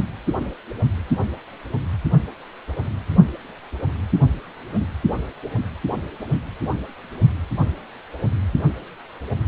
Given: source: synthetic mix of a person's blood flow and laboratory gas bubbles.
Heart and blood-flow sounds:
Doppler ultrasound of blood flow; precordium
no bubbles
From the record:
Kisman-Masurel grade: 000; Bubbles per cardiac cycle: 0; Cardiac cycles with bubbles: 0%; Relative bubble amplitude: no bubbles discernible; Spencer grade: 0 (complete lack of bubble signals)

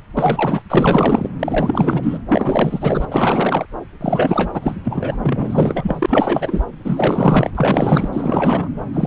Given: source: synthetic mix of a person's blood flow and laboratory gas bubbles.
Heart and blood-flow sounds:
Doppler ultrasound of blood flow; subclavian vein
0.17-0.62 s: bubbles
0.69-1.29 s: bubbles
1.39-2.18 s: bubbles
2.27-3.05 s: bubbles
3.09-3.66 s: bubbles
4.00-4.75 s: bubbles
4.84-5.17 s: bubbles
5.23-6.64 s: bubbles
6.84-7.50 s: bubbles
7.54-8.09 s: bubbles
8.12-8.71 s: bubbles
8.94-9.07 s: bubbles
From the record:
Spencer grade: 4 (maximum detectable bubble signal sounding continuously throughout systole and diastole of every cardiac period, and overriding the amplitude of the normal cardiac signals); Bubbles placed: anywhere in the cardiac cycle

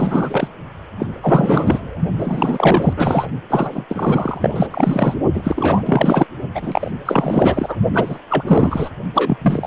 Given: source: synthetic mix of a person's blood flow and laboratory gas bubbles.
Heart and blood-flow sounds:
Doppler ultrasound of blood flow; precordium
0.00-0.48 s: bubbles
0.98-1.06 s: bubbles
1.21-1.99 s: bubbles
2.18-2.93 s: bubbles
2.96-3.28 s: bubbles
3.50-3.85 s: bubbles
3.89-4.67 s: bubbles
4.71-5.14 s: bubbles
5.33-6.26 s: bubbles
6.54-6.92 s: bubbles
7.05-7.76 s: bubbles
7.93-8.19 s: bubbles
8.30-8.43 s: bubbles
8.47-8.90 s: bubbles
9.14-9.38 s: bubbles
9.42-9.67 s: bubbles
From the record:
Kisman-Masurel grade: 444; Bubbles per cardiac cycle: continuous sound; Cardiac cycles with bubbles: 100%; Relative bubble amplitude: maximal (0.775 to 0.999); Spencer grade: 4 (maximum detectable bubble signal sounding continuously throughout systole and diastole of every cardiac period, and overriding the amplitude of the normal cardiac signals); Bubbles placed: only in the low amplitude regions of the cardiac cycle

